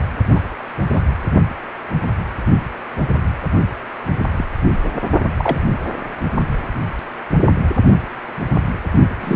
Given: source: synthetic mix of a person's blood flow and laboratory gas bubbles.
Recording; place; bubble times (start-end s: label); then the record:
Doppler ultrasound of blood flow; precordium
0.34-0.39 s: bubbles
0.92-1.02 s: bubbles
4.37-4.46 s: bubbles
4.83-4.90 s: bubbles
5.37-5.62 s: bubbles
9.20-9.36 s: bubbles
From the record:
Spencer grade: 2 (many but less than half of the cardiac periods contain bubble signals, singularly or in groups); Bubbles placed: only in the low amplitude regions of the cardiac cycle